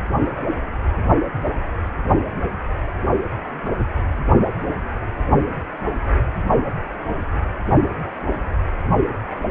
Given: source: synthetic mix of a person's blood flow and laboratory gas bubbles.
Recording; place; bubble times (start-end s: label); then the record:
Doppler ultrasound of blood flow; precordium
no bubbles
From the record:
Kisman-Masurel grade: 000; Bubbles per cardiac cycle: 0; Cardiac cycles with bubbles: 0%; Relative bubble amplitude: no bubbles discernible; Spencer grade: 0 (complete lack of bubble signals)